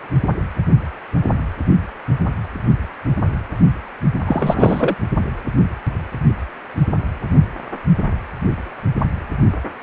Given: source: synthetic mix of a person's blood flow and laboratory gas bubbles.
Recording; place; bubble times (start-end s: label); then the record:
Doppler ultrasound of blood flow; precordium
4.26-4.96 s: bubbles
From the record:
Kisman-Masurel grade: 213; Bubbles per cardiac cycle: several, 3 to 8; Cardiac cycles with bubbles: 1 to 10%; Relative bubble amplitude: loud (0.450 to 0.775); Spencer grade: 1 (occasional bubble signal discernible with the cardiac motion signal, with majority of cardiac periods free of bubbles); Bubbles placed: only in the low amplitude regions of the cardiac cycle